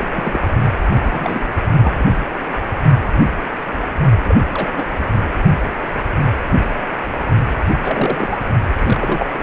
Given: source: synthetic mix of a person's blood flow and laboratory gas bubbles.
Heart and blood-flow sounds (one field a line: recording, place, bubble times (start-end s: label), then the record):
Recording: Doppler ultrasound of blood flow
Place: precordium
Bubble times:
0.00-0.42 s: bubbles
1.03-1.49 s: bubbles
1.80-2.04 s: bubbles
4.18-4.36 s: bubbles
4.54-4.70 s: bubbles
4.77-4.86 s: bubbles
7.73-7.78 s: bubbles
7.83-8.38 s: bubbles
8.76-9.39 s: bubbles
From the record:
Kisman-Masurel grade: 232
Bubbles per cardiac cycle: several, 3 to 8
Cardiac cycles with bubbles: 50 to 99%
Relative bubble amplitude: moderate (0.250 to 0.450)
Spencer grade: 3 (all of the cardiac periods contain showers or single bubble signals, but not dominating or overriding the cardiac motion signals)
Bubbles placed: only in the low amplitude regions of the cardiac cycle